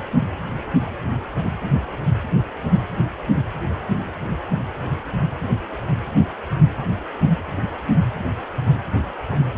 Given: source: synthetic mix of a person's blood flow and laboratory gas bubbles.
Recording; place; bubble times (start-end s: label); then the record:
Doppler ultrasound of blood flow; precordium
no bubbles
From the record:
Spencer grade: 0 (complete lack of bubble signals)